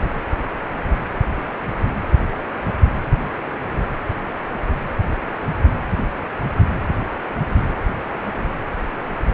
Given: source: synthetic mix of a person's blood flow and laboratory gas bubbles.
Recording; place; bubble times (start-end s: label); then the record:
Doppler ultrasound of blood flow; precordium
no bubbles
From the record:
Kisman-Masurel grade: 000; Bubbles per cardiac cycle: 0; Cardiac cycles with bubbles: 0%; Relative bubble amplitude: no bubbles discernible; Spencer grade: 0 (complete lack of bubble signals)